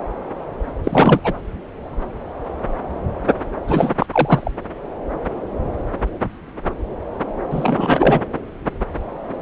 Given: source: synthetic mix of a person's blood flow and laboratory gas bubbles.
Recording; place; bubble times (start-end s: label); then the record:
Doppler ultrasound of blood flow; subclavian vein
0.83-1.21 s: bubbles
1.24-1.33 s: bubbles
3.67-3.94 s: bubbles
3.99-4.06 s: bubbles
4.12-4.51 s: bubbles
7.50-8.21 s: bubbles
From the record:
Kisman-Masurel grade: 223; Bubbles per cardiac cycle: several, 3 to 8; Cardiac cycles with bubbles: 10 to 50%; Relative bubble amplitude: loud (0.450 to 0.775); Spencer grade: 2 (many but less than half of the cardiac periods contain bubble signals, singularly or in groups); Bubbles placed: anywhere in the cardiac cycle